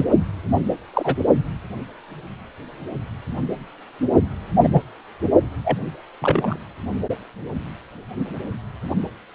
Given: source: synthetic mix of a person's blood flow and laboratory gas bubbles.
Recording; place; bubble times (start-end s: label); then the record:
Doppler ultrasound of blood flow; precordium
0.00-0.05 s: bubbles
0.94-1.16 s: bubbles
4.61-4.68 s: bubbles
4.73-4.83 s: bubbles
5.64-5.79 s: bubbles
6.21-6.58 s: bubbles
From the record:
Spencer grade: 2 (many but less than half of the cardiac periods contain bubble signals, singularly or in groups); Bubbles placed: only in the low amplitude regions of the cardiac cycle